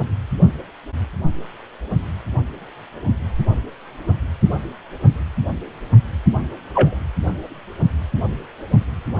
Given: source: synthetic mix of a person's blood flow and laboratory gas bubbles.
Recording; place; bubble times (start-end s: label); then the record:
Doppler ultrasound of blood flow; precordium
6.74-6.96 s: bubbles
From the record:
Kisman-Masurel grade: 123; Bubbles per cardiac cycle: 1 to 2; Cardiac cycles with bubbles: 10 to 50%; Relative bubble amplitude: loud (0.450 to 0.775); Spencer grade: 2 (many but less than half of the cardiac periods contain bubble signals, singularly or in groups); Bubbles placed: anywhere in the cardiac cycle